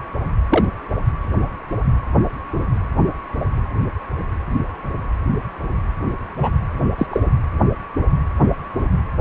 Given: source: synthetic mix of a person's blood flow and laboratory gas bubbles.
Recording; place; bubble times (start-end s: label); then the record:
Doppler ultrasound of blood flow; precordium
0.49-0.65 s: bubbles
6.39-6.50 s: bubbles
6.98-7.06 s: bubbles
7.11-7.21 s: bubbles
From the record:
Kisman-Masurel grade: 123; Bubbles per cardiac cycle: 1 to 2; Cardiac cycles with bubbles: 10 to 50%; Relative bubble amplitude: loud (0.450 to 0.775); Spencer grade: 2 (many but less than half of the cardiac periods contain bubble signals, singularly or in groups); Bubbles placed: anywhere in the cardiac cycle